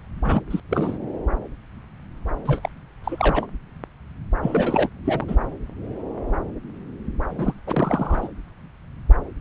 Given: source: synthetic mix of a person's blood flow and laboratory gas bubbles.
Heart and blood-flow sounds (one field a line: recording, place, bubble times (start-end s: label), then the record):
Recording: Doppler ultrasound of blood flow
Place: subclavian vein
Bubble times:
0.24-0.42 s: bubbles
0.50-0.60 s: bubbles
0.69-0.98 s: bubbles
2.45-2.69 s: bubbles
3.04-3.46 s: bubbles
4.42-4.89 s: bubbles
5.05-5.25 s: bubbles
5.27-5.35 s: bubbles
7.29-7.54 s: bubbles
7.67-8.28 s: bubbles
From the record:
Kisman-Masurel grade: 332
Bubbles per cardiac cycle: rolling drumbeat, 9 or more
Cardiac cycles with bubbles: 50 to 99%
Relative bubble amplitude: moderate (0.250 to 0.450)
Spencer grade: 3 (all of the cardiac periods contain showers or single bubble signals, but not dominating or overriding the cardiac motion signals)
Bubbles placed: anywhere in the cardiac cycle